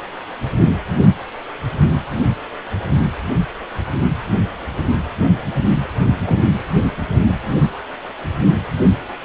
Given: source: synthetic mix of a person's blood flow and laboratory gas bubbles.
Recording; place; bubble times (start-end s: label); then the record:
Doppler ultrasound of blood flow; precordium
6.24-6.50 s: bubbles
From the record:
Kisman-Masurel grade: 112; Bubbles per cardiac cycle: 1 to 2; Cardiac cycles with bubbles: 1 to 10%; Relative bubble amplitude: moderate (0.250 to 0.450); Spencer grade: 1 (occasional bubble signal discernible with the cardiac motion signal, with majority of cardiac periods free of bubbles); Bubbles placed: anywhere in the cardiac cycle